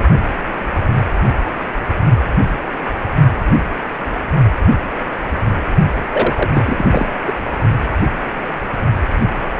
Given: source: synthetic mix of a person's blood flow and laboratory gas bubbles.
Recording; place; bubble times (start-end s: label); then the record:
Doppler ultrasound of blood flow; precordium
6.12-6.49 s: bubbles
6.53-7.09 s: bubbles
7.26-7.32 s: bubbles
From the record:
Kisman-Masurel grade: 223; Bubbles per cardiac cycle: several, 3 to 8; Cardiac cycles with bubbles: 10 to 50%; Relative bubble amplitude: loud (0.450 to 0.775); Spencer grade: 2 (many but less than half of the cardiac periods contain bubble signals, singularly or in groups); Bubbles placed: only in the low amplitude regions of the cardiac cycle